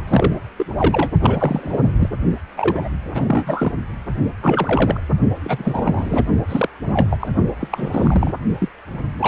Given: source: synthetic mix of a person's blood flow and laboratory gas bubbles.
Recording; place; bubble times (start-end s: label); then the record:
Doppler ultrasound of blood flow; precordium
0.07-0.35 s: bubbles
0.58-0.66 s: bubbles
0.78-1.11 s: bubbles
1.22-1.92 s: bubbles
1.99-2.09 s: bubbles
2.56-2.88 s: bubbles
3.15-3.72 s: bubbles
4.42-5.00 s: bubbles
5.43-6.22 s: bubbles
6.48-6.68 s: bubbles
6.83-7.08 s: bubbles
7.10-7.29 s: bubbles
7.60-7.67 s: bubbles
7.70-8.32 s: bubbles
8.59-8.69 s: bubbles
9.20-9.28 s: bubbles
From the record:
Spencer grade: 3 (all of the cardiac periods contain showers or single bubble signals, but not dominating or overriding the cardiac motion signals); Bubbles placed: only in the low amplitude regions of the cardiac cycle